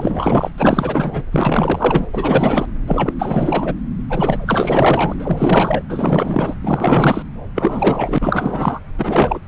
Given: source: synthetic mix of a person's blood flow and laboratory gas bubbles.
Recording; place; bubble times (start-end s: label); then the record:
Doppler ultrasound of blood flow; subclavian vein
0.00-0.50 s: bubbles
0.57-1.25 s: bubbles
1.32-2.06 s: bubbles
2.13-2.67 s: bubbles
2.87-3.13 s: bubbles
3.19-3.75 s: bubbles
4.09-5.14 s: bubbles
5.20-5.82 s: bubbles
5.89-6.55 s: bubbles
6.62-7.23 s: bubbles
7.55-8.79 s: bubbles
8.98-9.39 s: bubbles
From the record:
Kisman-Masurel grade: 444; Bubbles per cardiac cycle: continuous sound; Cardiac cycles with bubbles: 100%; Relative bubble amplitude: maximal (0.775 to 0.999); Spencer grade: 4 (maximum detectable bubble signal sounding continuously throughout systole and diastole of every cardiac period, and overriding the amplitude of the normal cardiac signals); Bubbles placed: anywhere in the cardiac cycle